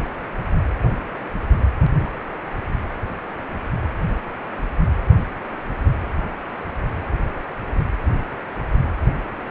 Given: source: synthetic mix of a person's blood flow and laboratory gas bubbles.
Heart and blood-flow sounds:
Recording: Doppler ultrasound of blood flow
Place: precordium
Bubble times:
no bubbles
From the record:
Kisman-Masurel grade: 000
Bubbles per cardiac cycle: 0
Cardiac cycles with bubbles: 0%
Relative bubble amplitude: no bubbles discernible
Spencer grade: 0 (complete lack of bubble signals)

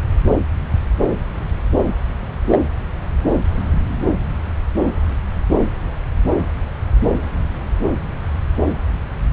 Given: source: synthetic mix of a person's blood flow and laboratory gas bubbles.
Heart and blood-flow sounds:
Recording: Doppler ultrasound of blood flow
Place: subclavian vein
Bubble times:
2.47-2.59 s: bubbles
From the record:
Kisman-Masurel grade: 113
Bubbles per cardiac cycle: 1 to 2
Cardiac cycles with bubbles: 1 to 10%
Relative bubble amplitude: loud (0.450 to 0.775)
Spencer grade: 1 (occasional bubble signal discernible with the cardiac motion signal, with majority of cardiac periods free of bubbles)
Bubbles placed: anywhere in the cardiac cycle

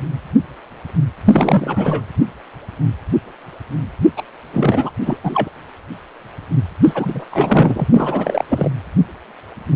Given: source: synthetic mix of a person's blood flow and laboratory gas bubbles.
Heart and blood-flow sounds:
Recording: Doppler ultrasound of blood flow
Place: precordium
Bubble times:
1.26-2.05 s: bubbles
4.17-4.23 s: bubbles
4.53-4.91 s: bubbles
5.04-5.18 s: bubbles
5.23-5.50 s: bubbles
6.83-7.25 s: bubbles
7.31-7.85 s: bubbles
7.92-8.45 s: bubbles
8.49-8.71 s: bubbles
From the record:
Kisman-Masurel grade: 333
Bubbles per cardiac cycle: rolling drumbeat, 9 or more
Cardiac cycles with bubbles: 50 to 99%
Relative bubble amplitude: loud (0.450 to 0.775)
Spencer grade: 3 (all of the cardiac periods contain showers or single bubble signals, but not dominating or overriding the cardiac motion signals)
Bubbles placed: anywhere in the cardiac cycle

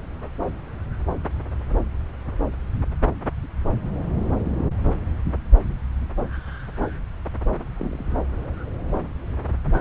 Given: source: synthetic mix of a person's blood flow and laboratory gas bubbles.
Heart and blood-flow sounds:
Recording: Doppler ultrasound of blood flow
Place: subclavian vein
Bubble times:
7.77-8.04 s: bubbles
From the record:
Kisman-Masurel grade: 111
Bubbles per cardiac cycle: 1 to 2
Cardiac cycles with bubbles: 1 to 10%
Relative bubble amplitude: barely perceptible (0.100 to 0.250)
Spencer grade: 1 (occasional bubble signal discernible with the cardiac motion signal, with majority of cardiac periods free of bubbles)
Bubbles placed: anywhere in the cardiac cycle

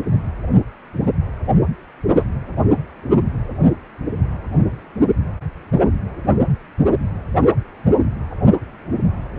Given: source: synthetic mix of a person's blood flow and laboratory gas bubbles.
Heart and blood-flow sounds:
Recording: Doppler ultrasound of blood flow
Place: precordium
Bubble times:
2.15-2.24 s: bubbles
From the record:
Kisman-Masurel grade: 113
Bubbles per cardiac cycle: 1 to 2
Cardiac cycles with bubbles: 1 to 10%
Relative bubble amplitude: loud (0.450 to 0.775)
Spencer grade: 1 (occasional bubble signal discernible with the cardiac motion signal, with majority of cardiac periods free of bubbles)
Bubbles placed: anywhere in the cardiac cycle

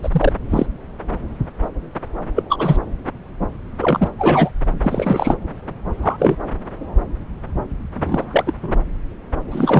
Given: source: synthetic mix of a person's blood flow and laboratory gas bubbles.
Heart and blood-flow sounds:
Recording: Doppler ultrasound of blood flow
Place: subclavian vein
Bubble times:
0.02-0.32 s: bubbles
0.50-0.66 s: bubbles
2.35-2.43 s: bubbles
2.50-2.77 s: bubbles
3.81-4.08 s: bubbles
4.18-4.50 s: bubbles
4.82-5.35 s: bubbles
6.01-6.36 s: bubbles
7.94-8.54 s: bubbles
8.62-8.79 s: bubbles
9.51-9.80 s: bubbles
From the record:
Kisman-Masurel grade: 233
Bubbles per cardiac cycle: several, 3 to 8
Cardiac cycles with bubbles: 50 to 99%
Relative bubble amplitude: loud (0.450 to 0.775)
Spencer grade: 3 (all of the cardiac periods contain showers or single bubble signals, but not dominating or overriding the cardiac motion signals)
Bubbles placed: anywhere in the cardiac cycle

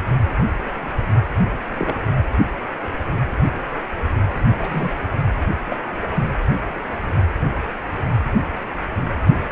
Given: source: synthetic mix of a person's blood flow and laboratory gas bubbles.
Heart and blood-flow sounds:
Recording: Doppler ultrasound of blood flow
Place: precordium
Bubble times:
1.78-1.94 s: bubbles
4.59-4.90 s: bubbles
5.68-5.76 s: bubbles
6.14-6.24 s: bubbles
From the record:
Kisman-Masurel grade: 122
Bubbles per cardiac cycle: 1 to 2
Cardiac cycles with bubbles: 10 to 50%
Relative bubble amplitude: moderate (0.250 to 0.450)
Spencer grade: 2 (many but less than half of the cardiac periods contain bubble signals, singularly or in groups)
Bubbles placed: anywhere in the cardiac cycle

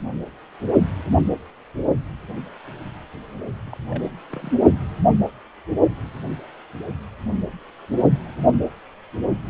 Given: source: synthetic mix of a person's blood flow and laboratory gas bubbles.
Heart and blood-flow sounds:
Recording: Doppler ultrasound of blood flow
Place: precordium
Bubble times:
3.66-3.77 s: bubbles
3.90-4.10 s: bubbles
4.30-4.53 s: bubbles
From the record:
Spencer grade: 1 (occasional bubble signal discernible with the cardiac motion signal, with majority of cardiac periods free of bubbles)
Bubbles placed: only in the low amplitude regions of the cardiac cycle

